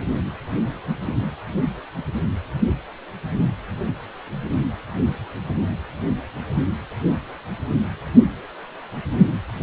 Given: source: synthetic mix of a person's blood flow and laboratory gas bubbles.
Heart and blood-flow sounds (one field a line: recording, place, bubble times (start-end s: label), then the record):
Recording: Doppler ultrasound of blood flow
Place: precordium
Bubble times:
no bubbles
From the record:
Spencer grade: 0 (complete lack of bubble signals)